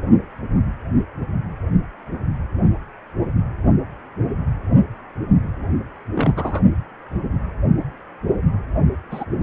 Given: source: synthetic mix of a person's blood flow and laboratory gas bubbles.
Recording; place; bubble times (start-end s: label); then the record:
Doppler ultrasound of blood flow; precordium
6.14-6.33 s: bubbles
6.37-6.62 s: bubbles
9.10-9.24 s: bubbles
From the record:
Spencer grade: 2 (many but less than half of the cardiac periods contain bubble signals, singularly or in groups); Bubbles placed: only in the low amplitude regions of the cardiac cycle